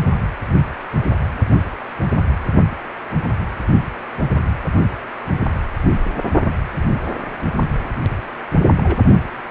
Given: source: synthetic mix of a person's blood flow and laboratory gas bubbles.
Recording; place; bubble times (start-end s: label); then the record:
Doppler ultrasound of blood flow; precordium
8.65-8.72 s: bubbles
8.78-8.97 s: bubbles
From the record:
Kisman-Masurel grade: 121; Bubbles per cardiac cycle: 1 to 2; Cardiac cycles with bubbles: 10 to 50%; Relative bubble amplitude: barely perceptible (0.100 to 0.250); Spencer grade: 2 (many but less than half of the cardiac periods contain bubble signals, singularly or in groups); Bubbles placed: only in the low amplitude regions of the cardiac cycle